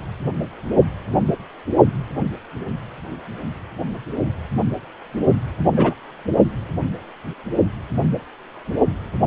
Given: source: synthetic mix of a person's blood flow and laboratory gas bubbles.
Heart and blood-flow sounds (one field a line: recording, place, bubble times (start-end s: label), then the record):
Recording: Doppler ultrasound of blood flow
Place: precordium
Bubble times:
5.76-5.94 s: bubbles
From the record:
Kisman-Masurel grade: 113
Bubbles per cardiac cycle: 1 to 2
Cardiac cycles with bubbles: 1 to 10%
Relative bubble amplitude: loud (0.450 to 0.775)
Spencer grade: 1 (occasional bubble signal discernible with the cardiac motion signal, with majority of cardiac periods free of bubbles)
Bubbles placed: only in the low amplitude regions of the cardiac cycle